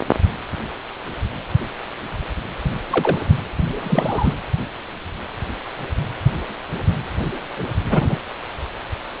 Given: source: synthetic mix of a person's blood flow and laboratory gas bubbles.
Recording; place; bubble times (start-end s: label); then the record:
Doppler ultrasound of blood flow; precordium
2.90-3.18 s: bubbles
3.83-4.34 s: bubbles
7.84-8.16 s: bubbles
From the record:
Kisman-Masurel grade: 122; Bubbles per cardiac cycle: 1 to 2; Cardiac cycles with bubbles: 10 to 50%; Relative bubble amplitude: moderate (0.250 to 0.450); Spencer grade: 2 (many but less than half of the cardiac periods contain bubble signals, singularly or in groups); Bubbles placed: anywhere in the cardiac cycle